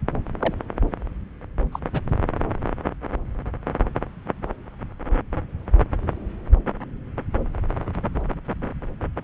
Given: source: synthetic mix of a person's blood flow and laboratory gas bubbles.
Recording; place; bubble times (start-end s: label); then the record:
Doppler ultrasound of blood flow; subclavian vein
0.40-0.53 s: bubbles
1.72-1.80 s: bubbles
1.93-2.00 s: bubbles
From the record:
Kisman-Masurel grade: 121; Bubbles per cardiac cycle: 1 to 2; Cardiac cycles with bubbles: 10 to 50%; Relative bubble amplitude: barely perceptible (0.100 to 0.250); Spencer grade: 2 (many but less than half of the cardiac periods contain bubble signals, singularly or in groups); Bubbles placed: anywhere in the cardiac cycle